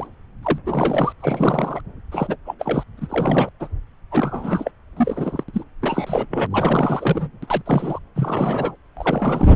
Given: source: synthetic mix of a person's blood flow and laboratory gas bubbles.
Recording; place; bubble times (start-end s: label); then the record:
Doppler ultrasound of blood flow; subclavian vein
0.00-0.06 s: bubbles
0.43-0.59 s: bubbles
0.66-1.12 s: bubbles
1.20-1.80 s: bubbles
2.11-2.36 s: bubbles
2.46-2.54 s: bubbles
2.59-2.83 s: bubbles
2.98-3.49 s: bubbles
3.60-3.68 s: bubbles
4.11-4.71 s: bubbles
4.96-5.43 s: bubbles
5.48-5.50 s: bubbles
5.53-5.63 s: bubbles
5.81-6.25 s: bubbles
6.30-6.46 s: bubbles
6.50-7.28 s: bubbles
7.42-7.62 s: bubbles
7.66-7.99 s: bubbles
8.16-8.76 s: bubbles
8.96-9.56 s: bubbles
From the record:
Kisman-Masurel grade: 342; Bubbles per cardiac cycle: rolling drumbeat, 9 or more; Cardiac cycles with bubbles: 100%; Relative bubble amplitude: moderate (0.250 to 0.450); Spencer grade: 3 (all of the cardiac periods contain showers or single bubble signals, but not dominating or overriding the cardiac motion signals); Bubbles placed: anywhere in the cardiac cycle